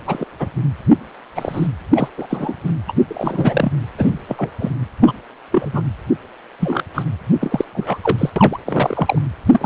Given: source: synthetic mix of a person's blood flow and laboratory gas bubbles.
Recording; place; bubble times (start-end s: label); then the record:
Doppler ultrasound of blood flow; precordium
0.05-0.26 s: bubbles
0.40-0.50 s: bubbles
1.35-1.67 s: bubbles
1.94-2.08 s: bubbles
2.18-2.27 s: bubbles
2.30-2.56 s: bubbles
2.64-2.73 s: bubbles
2.88-2.93 s: bubbles
3.08-3.72 s: bubbles
3.95-4.21 s: bubbles
4.28-4.50 s: bubbles
4.60-4.71 s: bubbles
5.02-5.13 s: bubbles
5.51-5.82 s: bubbles
6.60-6.84 s: bubbles
6.95-7.03 s: bubbles
7.41-7.65 s: bubbles
7.73-7.98 s: bubbles
8.03-8.30 s: bubbles
8.36-8.59 s: bubbles
8.65-9.19 s: bubbles
9.51-9.66 s: bubbles
From the record:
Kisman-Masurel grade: 243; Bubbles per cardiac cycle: several, 3 to 8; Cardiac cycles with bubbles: 100%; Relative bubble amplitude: loud (0.450 to 0.775); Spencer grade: 3 (all of the cardiac periods contain showers or single bubble signals, but not dominating or overriding the cardiac motion signals); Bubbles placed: anywhere in the cardiac cycle